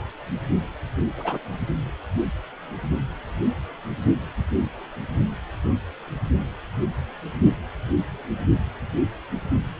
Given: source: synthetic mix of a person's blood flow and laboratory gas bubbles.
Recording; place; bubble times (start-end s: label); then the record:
Doppler ultrasound of blood flow; precordium
1.17-1.39 s: bubbles
From the record:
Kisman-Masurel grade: 111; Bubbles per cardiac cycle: 1 to 2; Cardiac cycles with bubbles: 1 to 10%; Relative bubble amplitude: barely perceptible (0.100 to 0.250); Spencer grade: 1 (occasional bubble signal discernible with the cardiac motion signal, with majority of cardiac periods free of bubbles); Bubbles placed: only in the low amplitude regions of the cardiac cycle